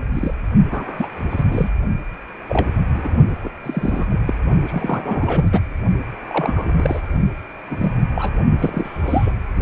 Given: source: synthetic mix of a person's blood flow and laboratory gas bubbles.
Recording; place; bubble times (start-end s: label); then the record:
Doppler ultrasound of blood flow; precordium
0.13-0.34 s: bubbles
0.71-1.06 s: bubbles
1.30-1.70 s: bubbles
2.48-2.69 s: bubbles
2.94-3.12 s: bubbles
3.42-3.50 s: bubbles
3.63-4.06 s: bubbles
4.09-4.21 s: bubbles
4.27-4.34 s: bubbles
4.66-5.48 s: bubbles
5.52-5.60 s: bubbles
6.28-7.01 s: bubbles
7.69-7.93 s: bubbles
8.15-8.31 s: bubbles
8.58-9.32 s: bubbles
From the record:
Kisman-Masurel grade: 242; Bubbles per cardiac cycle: several, 3 to 8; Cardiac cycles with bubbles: 100%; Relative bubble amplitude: moderate (0.250 to 0.450); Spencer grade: 3 (all of the cardiac periods contain showers or single bubble signals, but not dominating or overriding the cardiac motion signals); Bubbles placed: only in the low amplitude regions of the cardiac cycle